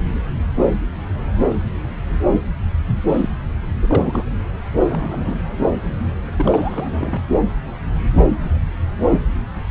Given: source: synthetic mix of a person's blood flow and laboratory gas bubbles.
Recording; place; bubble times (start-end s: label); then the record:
Doppler ultrasound of blood flow; subclavian vein
3.07-3.29 s: bubbles
3.80-3.88 s: bubbles
3.90-4.24 s: bubbles
4.80-5.36 s: bubbles
6.38-7.25 s: bubbles
From the record:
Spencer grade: 2 (many but less than half of the cardiac periods contain bubble signals, singularly or in groups); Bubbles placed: anywhere in the cardiac cycle